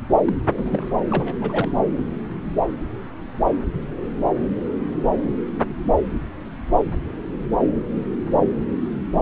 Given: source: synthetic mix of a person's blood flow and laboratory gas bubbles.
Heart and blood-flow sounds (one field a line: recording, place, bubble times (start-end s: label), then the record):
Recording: Doppler ultrasound of blood flow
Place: subclavian vein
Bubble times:
0.25-0.33 s: bubbles
0.56-0.90 s: bubbles
1.10-1.35 s: bubbles
1.41-1.72 s: bubbles
From the record:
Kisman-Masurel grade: 221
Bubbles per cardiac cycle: several, 3 to 8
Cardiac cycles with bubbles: 10 to 50%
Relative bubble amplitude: barely perceptible (0.100 to 0.250)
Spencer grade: 2 (many but less than half of the cardiac periods contain bubble signals, singularly or in groups)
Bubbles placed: anywhere in the cardiac cycle